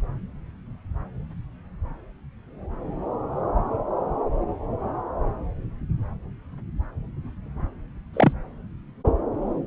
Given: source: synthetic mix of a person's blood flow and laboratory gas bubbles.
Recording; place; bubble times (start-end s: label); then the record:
Doppler ultrasound of blood flow; subclavian vein
8.13-8.32 s: bubbles
From the record:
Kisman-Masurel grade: 122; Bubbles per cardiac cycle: 1 to 2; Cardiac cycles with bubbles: 10 to 50%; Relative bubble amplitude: moderate (0.250 to 0.450); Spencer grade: 2 (many but less than half of the cardiac periods contain bubble signals, singularly or in groups); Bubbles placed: anywhere in the cardiac cycle